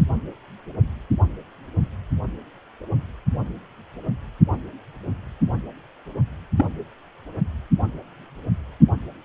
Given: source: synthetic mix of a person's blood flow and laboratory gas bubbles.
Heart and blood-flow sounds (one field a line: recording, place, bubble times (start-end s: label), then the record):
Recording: Doppler ultrasound of blood flow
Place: precordium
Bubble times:
6.56-6.66 s: bubbles
From the record:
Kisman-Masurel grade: 112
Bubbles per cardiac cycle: 1 to 2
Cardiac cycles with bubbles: 1 to 10%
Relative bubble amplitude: moderate (0.250 to 0.450)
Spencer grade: 1 (occasional bubble signal discernible with the cardiac motion signal, with majority of cardiac periods free of bubbles)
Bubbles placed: only in the low amplitude regions of the cardiac cycle